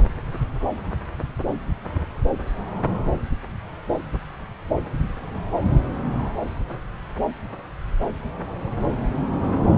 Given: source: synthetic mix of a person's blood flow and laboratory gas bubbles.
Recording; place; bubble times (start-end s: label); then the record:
Doppler ultrasound of blood flow; subclavian vein
no bubbles
From the record:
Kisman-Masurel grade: 000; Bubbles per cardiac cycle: 0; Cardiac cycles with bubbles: 0%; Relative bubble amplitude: no bubbles discernible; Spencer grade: 0 (complete lack of bubble signals)